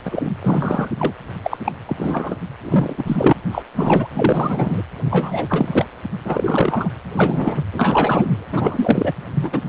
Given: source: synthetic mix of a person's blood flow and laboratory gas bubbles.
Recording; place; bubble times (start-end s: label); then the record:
Doppler ultrasound of blood flow; precordium
0.05-0.32 s: bubbles
0.43-0.89 s: bubbles
0.97-1.12 s: bubbles
1.43-1.57 s: bubbles
1.65-1.72 s: bubbles
1.86-2.36 s: bubbles
2.63-3.33 s: bubbles
3.52-3.63 s: bubbles
3.74-4.07 s: bubbles
4.13-4.82 s: bubbles
5.10-5.85 s: bubbles
6.25-6.89 s: bubbles
7.14-7.63 s: bubbles
7.72-8.45 s: bubbles
8.52-9.12 s: bubbles
9.34-9.60 s: bubbles
From the record:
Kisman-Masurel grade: 343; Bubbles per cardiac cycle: rolling drumbeat, 9 or more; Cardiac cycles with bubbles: 100%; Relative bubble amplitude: loud (0.450 to 0.775); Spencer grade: 3 (all of the cardiac periods contain showers or single bubble signals, but not dominating or overriding the cardiac motion signals); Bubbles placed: anywhere in the cardiac cycle